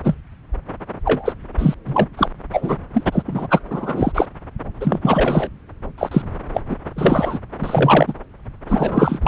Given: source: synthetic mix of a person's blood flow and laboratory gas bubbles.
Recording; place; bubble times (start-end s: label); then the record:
Doppler ultrasound of blood flow; subclavian vein
0.04-0.14 s: bubbles
1.05-1.32 s: bubbles
1.58-1.74 s: bubbles
1.86-2.07 s: bubbles
2.17-2.29 s: bubbles
2.52-2.76 s: bubbles
2.94-3.03 s: bubbles
3.11-3.22 s: bubbles
3.27-3.47 s: bubbles
3.50-3.60 s: bubbles
3.69-4.12 s: bubbles
4.15-4.26 s: bubbles
4.80-4.99 s: bubbles
5.02-5.50 s: bubbles
5.98-6.22 s: bubbles
6.54-6.61 s: bubbles
6.69-6.77 s: bubbles
6.96-7.39 s: bubbles
7.60-8.13 s: bubbles
8.68-9.19 s: bubbles
9.21-9.28 s: bubbles
From the record:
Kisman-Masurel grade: 343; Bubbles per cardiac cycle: rolling drumbeat, 9 or more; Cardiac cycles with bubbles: 100%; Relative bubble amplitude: loud (0.450 to 0.775); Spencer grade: 3 (all of the cardiac periods contain showers or single bubble signals, but not dominating or overriding the cardiac motion signals); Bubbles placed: anywhere in the cardiac cycle